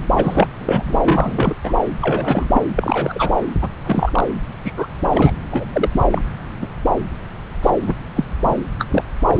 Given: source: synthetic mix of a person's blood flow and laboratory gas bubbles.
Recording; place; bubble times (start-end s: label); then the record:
Doppler ultrasound of blood flow; subclavian vein
0.15-0.47 s: bubbles
0.58-0.99 s: bubbles
1.04-1.56 s: bubbles
1.64-1.76 s: bubbles
2.01-2.62 s: bubbles
2.76-3.37 s: bubbles
3.62-3.68 s: bubbles
3.83-4.29 s: bubbles
4.64-4.73 s: bubbles
4.77-4.87 s: bubbles
5.04-5.09 s: bubbles
5.12-5.32 s: bubbles
5.51-5.67 s: bubbles
5.73-6.05 s: bubbles
6.11-6.21 s: bubbles
6.61-6.67 s: bubbles
7.63-7.71 s: bubbles
7.87-7.95 s: bubbles
8.16-8.24 s: bubbles
8.43-8.54 s: bubbles
8.79-8.87 s: bubbles
8.90-9.04 s: bubbles
9.24-9.40 s: bubbles
From the record:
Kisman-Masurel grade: 233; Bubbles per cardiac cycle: several, 3 to 8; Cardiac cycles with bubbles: 50 to 99%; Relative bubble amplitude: loud (0.450 to 0.775); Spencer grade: 3 (all of the cardiac periods contain showers or single bubble signals, but not dominating or overriding the cardiac motion signals); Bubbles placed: anywhere in the cardiac cycle